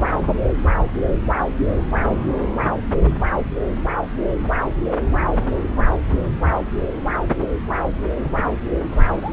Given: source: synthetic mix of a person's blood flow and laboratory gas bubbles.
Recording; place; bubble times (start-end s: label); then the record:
Doppler ultrasound of blood flow; subclavian vein
8.92-9.33 s: bubbles
From the record:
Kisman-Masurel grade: 111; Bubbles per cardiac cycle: 1 to 2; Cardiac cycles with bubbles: 1 to 10%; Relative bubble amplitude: barely perceptible (0.100 to 0.250); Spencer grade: 1 (occasional bubble signal discernible with the cardiac motion signal, with majority of cardiac periods free of bubbles); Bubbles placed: anywhere in the cardiac cycle